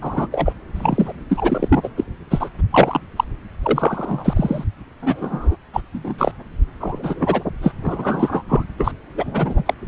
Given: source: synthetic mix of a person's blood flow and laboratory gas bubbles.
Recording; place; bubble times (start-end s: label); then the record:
Doppler ultrasound of blood flow; subclavian vein
0.01-0.27 s: bubbles
0.32-0.52 s: bubbles
0.75-1.13 s: bubbles
1.28-1.79 s: bubbles
1.83-1.88 s: bubbles
1.97-2.04 s: bubbles
2.31-2.50 s: bubbles
2.58-2.61 s: bubbles
2.71-3.00 s: bubbles
3.16-3.24 s: bubbles
3.62-4.64 s: bubbles
5.02-5.57 s: bubbles
5.73-5.81 s: bubbles
5.93-6.32 s: bubbles
6.80-7.44 s: bubbles
7.62-7.73 s: bubbles
7.82-8.43 s: bubbles
8.48-8.64 s: bubbles
8.79-8.91 s: bubbles
9.17-9.74 s: bubbles
From the record:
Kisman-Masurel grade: 243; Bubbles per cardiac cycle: several, 3 to 8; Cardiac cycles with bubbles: 100%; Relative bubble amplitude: loud (0.450 to 0.775); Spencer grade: 3 (all of the cardiac periods contain showers or single bubble signals, but not dominating or overriding the cardiac motion signals); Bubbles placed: anywhere in the cardiac cycle